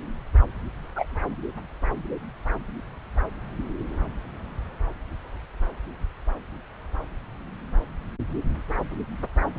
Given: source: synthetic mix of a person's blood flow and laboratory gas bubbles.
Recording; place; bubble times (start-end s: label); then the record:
Doppler ultrasound of blood flow; subclavian vein
0.96-1.05 s: bubbles
From the record:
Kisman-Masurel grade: 112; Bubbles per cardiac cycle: 1 to 2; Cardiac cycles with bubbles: 1 to 10%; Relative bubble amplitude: moderate (0.250 to 0.450); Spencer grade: 1 (occasional bubble signal discernible with the cardiac motion signal, with majority of cardiac periods free of bubbles); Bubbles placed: anywhere in the cardiac cycle